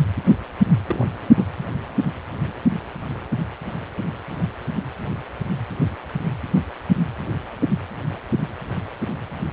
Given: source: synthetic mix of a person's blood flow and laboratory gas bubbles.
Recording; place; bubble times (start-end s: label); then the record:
Doppler ultrasound of blood flow; precordium
0.86-1.51 s: bubbles
From the record:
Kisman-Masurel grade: 111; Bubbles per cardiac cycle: 1 to 2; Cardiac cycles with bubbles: 1 to 10%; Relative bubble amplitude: barely perceptible (0.100 to 0.250); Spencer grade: 1 (occasional bubble signal discernible with the cardiac motion signal, with majority of cardiac periods free of bubbles); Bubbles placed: anywhere in the cardiac cycle